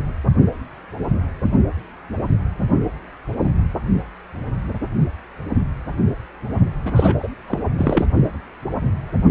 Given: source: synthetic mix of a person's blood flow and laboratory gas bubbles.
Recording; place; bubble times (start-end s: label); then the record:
Doppler ultrasound of blood flow; precordium
6.83-7.15 s: bubbles
7.19-7.29 s: bubbles
7.47-7.62 s: bubbles
7.78-8.06 s: bubbles
From the record:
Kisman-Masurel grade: 212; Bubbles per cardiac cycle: several, 3 to 8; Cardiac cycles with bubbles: 1 to 10%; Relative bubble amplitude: moderate (0.250 to 0.450); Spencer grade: 1 (occasional bubble signal discernible with the cardiac motion signal, with majority of cardiac periods free of bubbles); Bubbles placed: only in the low amplitude regions of the cardiac cycle